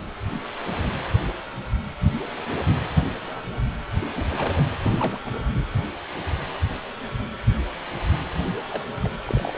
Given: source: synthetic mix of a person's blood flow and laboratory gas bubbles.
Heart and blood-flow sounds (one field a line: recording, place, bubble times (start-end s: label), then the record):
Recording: Doppler ultrasound of blood flow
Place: precordium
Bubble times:
3.99-4.09 s: bubbles
4.13-4.64 s: bubbles
4.83-5.18 s: bubbles
5.25-5.31 s: bubbles
8.69-8.85 s: bubbles
8.98-9.10 s: bubbles
9.25-9.57 s: bubbles
From the record:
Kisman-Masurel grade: 221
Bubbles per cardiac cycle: several, 3 to 8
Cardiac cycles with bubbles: 10 to 50%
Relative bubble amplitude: barely perceptible (0.100 to 0.250)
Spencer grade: 2 (many but less than half of the cardiac periods contain bubble signals, singularly or in groups)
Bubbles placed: anywhere in the cardiac cycle